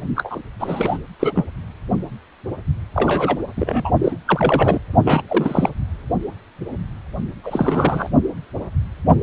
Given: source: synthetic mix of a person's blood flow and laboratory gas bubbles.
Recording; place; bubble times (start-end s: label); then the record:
Doppler ultrasound of blood flow; precordium
0.15-0.39 s: bubbles
0.59-0.98 s: bubbles
1.20-1.33 s: bubbles
1.35-1.45 s: bubbles
2.94-3.37 s: bubbles
3.56-3.91 s: bubbles
4.04-4.17 s: bubbles
4.25-4.79 s: bubbles
5.05-5.22 s: bubbles
5.28-5.70 s: bubbles
7.44-8.09 s: bubbles
From the record:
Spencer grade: 3 (all of the cardiac periods contain showers or single bubble signals, but not dominating or overriding the cardiac motion signals); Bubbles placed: only in the low amplitude regions of the cardiac cycle